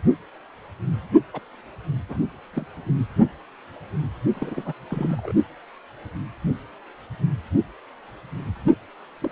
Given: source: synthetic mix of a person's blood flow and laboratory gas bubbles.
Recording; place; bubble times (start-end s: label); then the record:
Doppler ultrasound of blood flow; precordium
1.33-1.40 s: bubbles
2.09-2.17 s: bubbles
2.53-2.67 s: bubbles
4.33-4.73 s: bubbles
4.91-5.33 s: bubbles
9.21-9.30 s: bubbles
From the record:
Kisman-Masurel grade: 221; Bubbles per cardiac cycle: several, 3 to 8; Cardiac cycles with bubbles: 10 to 50%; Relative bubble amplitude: barely perceptible (0.100 to 0.250); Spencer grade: 2 (many but less than half of the cardiac periods contain bubble signals, singularly or in groups); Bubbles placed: only in the low amplitude regions of the cardiac cycle